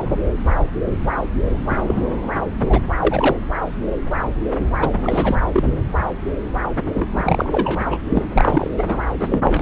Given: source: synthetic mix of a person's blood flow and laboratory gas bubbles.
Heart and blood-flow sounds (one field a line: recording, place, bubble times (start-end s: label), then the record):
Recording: Doppler ultrasound of blood flow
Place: subclavian vein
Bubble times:
1.68-1.82 s: bubbles
1.87-2.02 s: bubbles
2.23-2.32 s: bubbles
2.60-2.79 s: bubbles
2.99-3.37 s: bubbles
4.59-4.66 s: bubbles
4.79-4.92 s: bubbles
5.03-5.37 s: bubbles
5.53-5.74 s: bubbles
6.95-7.81 s: bubbles
7.90-7.96 s: bubbles
8.09-8.22 s: bubbles
8.36-8.71 s: bubbles
8.78-8.97 s: bubbles
9.20-9.62 s: bubbles
From the record:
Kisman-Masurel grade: 332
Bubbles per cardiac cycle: rolling drumbeat, 9 or more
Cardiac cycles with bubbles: 50 to 99%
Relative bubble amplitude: moderate (0.250 to 0.450)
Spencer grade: 3 (all of the cardiac periods contain showers or single bubble signals, but not dominating or overriding the cardiac motion signals)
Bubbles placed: anywhere in the cardiac cycle